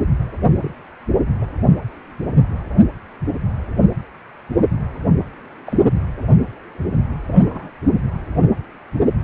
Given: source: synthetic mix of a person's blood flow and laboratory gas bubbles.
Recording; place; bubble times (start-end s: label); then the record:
Doppler ultrasound of blood flow; precordium
0.62-0.75 s: bubbles
1.42-1.45 s: bubbles
5.66-5.76 s: bubbles
7.28-7.69 s: bubbles
From the record:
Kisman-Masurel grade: 121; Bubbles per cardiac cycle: 1 to 2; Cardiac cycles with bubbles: 10 to 50%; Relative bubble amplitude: barely perceptible (0.100 to 0.250); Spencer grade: 2 (many but less than half of the cardiac periods contain bubble signals, singularly or in groups); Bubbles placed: anywhere in the cardiac cycle